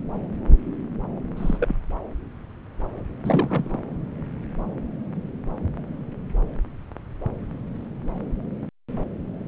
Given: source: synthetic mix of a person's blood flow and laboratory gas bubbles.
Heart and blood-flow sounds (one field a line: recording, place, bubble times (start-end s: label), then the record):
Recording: Doppler ultrasound of blood flow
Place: subclavian vein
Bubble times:
1.36-1.58 s: bubbles
1.60-1.75 s: bubbles
3.23-3.78 s: bubbles
From the record:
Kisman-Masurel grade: 221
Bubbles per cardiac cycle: several, 3 to 8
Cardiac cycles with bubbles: 10 to 50%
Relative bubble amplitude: barely perceptible (0.100 to 0.250)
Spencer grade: 2 (many but less than half of the cardiac periods contain bubble signals, singularly or in groups)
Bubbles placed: anywhere in the cardiac cycle